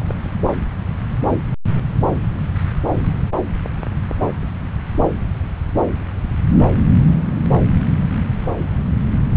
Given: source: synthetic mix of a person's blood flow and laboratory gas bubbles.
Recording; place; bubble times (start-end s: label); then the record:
Doppler ultrasound of blood flow; subclavian vein
0.00-0.18 s: bubbles
From the record:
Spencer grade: 1 (occasional bubble signal discernible with the cardiac motion signal, with majority of cardiac periods free of bubbles); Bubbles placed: anywhere in the cardiac cycle